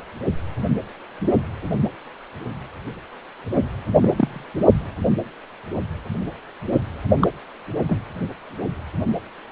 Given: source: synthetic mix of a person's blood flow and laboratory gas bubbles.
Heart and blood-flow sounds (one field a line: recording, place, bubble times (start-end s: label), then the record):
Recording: Doppler ultrasound of blood flow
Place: precordium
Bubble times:
4.02-4.44 s: bubbles
7.21-7.28 s: bubbles
7.88-7.97 s: bubbles
From the record:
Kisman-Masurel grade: 122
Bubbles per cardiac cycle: 1 to 2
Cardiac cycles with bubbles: 10 to 50%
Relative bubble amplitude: moderate (0.250 to 0.450)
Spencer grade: 2 (many but less than half of the cardiac periods contain bubble signals, singularly or in groups)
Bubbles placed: only in the low amplitude regions of the cardiac cycle